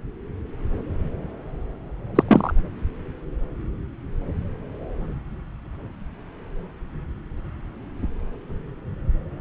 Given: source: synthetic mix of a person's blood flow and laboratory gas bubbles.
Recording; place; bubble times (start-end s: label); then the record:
Doppler ultrasound of blood flow; subclavian vein
2.15-2.23 s: bubbles
2.28-2.52 s: bubbles
From the record:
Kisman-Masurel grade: 213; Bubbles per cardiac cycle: several, 3 to 8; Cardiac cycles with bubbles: 1 to 10%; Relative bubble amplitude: loud (0.450 to 0.775); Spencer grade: 1 (occasional bubble signal discernible with the cardiac motion signal, with majority of cardiac periods free of bubbles); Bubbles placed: anywhere in the cardiac cycle